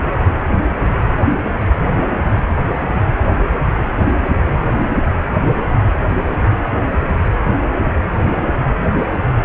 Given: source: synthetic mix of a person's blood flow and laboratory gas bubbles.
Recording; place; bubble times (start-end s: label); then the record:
Doppler ultrasound of blood flow; precordium
7.83-8.09 s: bubbles
8.32-8.46 s: bubbles
8.50-8.54 s: bubbles
From the record:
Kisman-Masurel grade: 221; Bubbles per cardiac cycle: several, 3 to 8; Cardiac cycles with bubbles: 10 to 50%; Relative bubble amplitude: barely perceptible (0.100 to 0.250); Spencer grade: 2 (many but less than half of the cardiac periods contain bubble signals, singularly or in groups); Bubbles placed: anywhere in the cardiac cycle